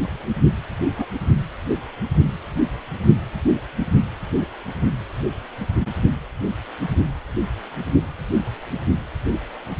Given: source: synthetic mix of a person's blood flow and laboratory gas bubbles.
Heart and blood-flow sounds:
Doppler ultrasound of blood flow; precordium
0.95-1.06 s: bubbles
From the record:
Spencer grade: 2 (many but less than half of the cardiac periods contain bubble signals, singularly or in groups); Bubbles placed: anywhere in the cardiac cycle

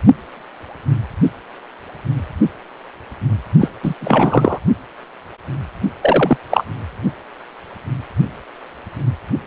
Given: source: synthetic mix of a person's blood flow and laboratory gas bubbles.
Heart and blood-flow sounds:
Doppler ultrasound of blood flow; precordium
3.60-3.69 s: bubbles
3.83-3.94 s: bubbles
4.00-4.58 s: bubbles
6.01-6.37 s: bubbles
6.50-6.65 s: bubbles
From the record:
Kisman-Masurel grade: 223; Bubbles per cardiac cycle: several, 3 to 8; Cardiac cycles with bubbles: 10 to 50%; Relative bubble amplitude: loud (0.450 to 0.775); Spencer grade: 2 (many but less than half of the cardiac periods contain bubble signals, singularly or in groups); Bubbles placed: only in the low amplitude regions of the cardiac cycle

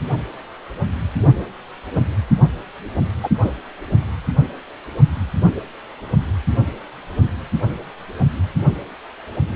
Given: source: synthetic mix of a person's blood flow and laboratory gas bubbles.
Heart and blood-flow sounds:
Doppler ultrasound of blood flow; precordium
3.23-3.29 s: bubbles
3.42-3.50 s: bubbles
From the record:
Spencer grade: 1 (occasional bubble signal discernible with the cardiac motion signal, with majority of cardiac periods free of bubbles); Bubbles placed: only in the low amplitude regions of the cardiac cycle

